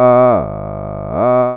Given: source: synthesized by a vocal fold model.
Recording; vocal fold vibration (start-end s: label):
sustained vowel that changes in the middle
0.00-0.28 s: 124.4 Hz, open quotient 0.34
0.48-1.08 s: 51.0 Hz, open quotient 0.29
1.28-1.57 s: 124.4 Hz, open quotient 0.34